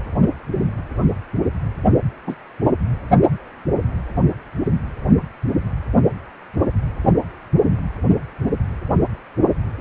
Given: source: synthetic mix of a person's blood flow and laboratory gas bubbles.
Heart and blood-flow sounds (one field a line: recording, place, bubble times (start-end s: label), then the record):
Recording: Doppler ultrasound of blood flow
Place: precordium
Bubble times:
2.27-2.35 s: bubbles
From the record:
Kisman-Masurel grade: 113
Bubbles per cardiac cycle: 1 to 2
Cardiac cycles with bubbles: 1 to 10%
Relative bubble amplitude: loud (0.450 to 0.775)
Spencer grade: 1 (occasional bubble signal discernible with the cardiac motion signal, with majority of cardiac periods free of bubbles)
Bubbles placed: only in the low amplitude regions of the cardiac cycle